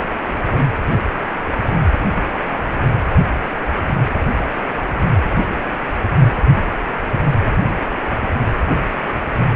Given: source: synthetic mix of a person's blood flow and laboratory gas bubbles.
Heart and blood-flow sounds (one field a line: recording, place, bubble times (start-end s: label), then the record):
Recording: Doppler ultrasound of blood flow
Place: precordium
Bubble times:
no bubbles
From the record:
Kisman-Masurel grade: 000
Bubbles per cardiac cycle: 0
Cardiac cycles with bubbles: 0%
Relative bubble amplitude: no bubbles discernible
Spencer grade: 0 (complete lack of bubble signals)